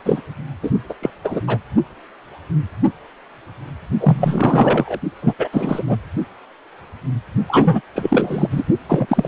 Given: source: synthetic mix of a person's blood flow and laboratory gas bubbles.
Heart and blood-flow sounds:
Doppler ultrasound of blood flow; precordium
0.00-0.21 s: bubbles
0.62-0.70 s: bubbles
0.89-0.94 s: bubbles
1.02-1.10 s: bubbles
1.24-1.41 s: bubbles
1.47-1.57 s: bubbles
4.00-4.99 s: bubbles
5.21-5.33 s: bubbles
5.38-5.48 s: bubbles
5.53-5.83 s: bubbles
5.87-5.96 s: bubbles
7.48-7.82 s: bubbles
7.95-8.47 s: bubbles
8.50-8.63 s: bubbles
8.88-9.28 s: bubbles
From the record:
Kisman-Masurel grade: 333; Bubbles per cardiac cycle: rolling drumbeat, 9 or more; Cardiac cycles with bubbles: 50 to 99%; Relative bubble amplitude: loud (0.450 to 0.775); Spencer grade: 3 (all of the cardiac periods contain showers or single bubble signals, but not dominating or overriding the cardiac motion signals); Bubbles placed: only in the low amplitude regions of the cardiac cycle

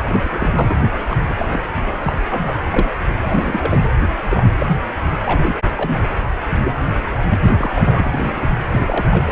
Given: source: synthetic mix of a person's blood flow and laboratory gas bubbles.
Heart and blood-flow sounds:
Doppler ultrasound of blood flow; precordium
0.08-0.76 s: bubbles
1.08-1.17 s: bubbles
1.30-1.34 s: bubbles
1.39-1.62 s: bubbles
2.03-2.13 s: bubbles
2.28-2.54 s: bubbles
2.71-2.90 s: bubbles
3.20-3.84 s: bubbles
4.29-4.43 s: bubbles
4.59-4.67 s: bubbles
5.25-5.55 s: bubbles
5.77-5.97 s: bubbles
6.64-6.72 s: bubbles
7.30-7.39 s: bubbles
7.42-7.70 s: bubbles
7.76-8.50 s: bubbles
8.71-9.31 s: bubbles
From the record:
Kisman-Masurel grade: 242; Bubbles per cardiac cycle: several, 3 to 8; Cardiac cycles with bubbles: 100%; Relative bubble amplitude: moderate (0.250 to 0.450); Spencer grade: 3 (all of the cardiac periods contain showers or single bubble signals, but not dominating or overriding the cardiac motion signals); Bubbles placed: anywhere in the cardiac cycle

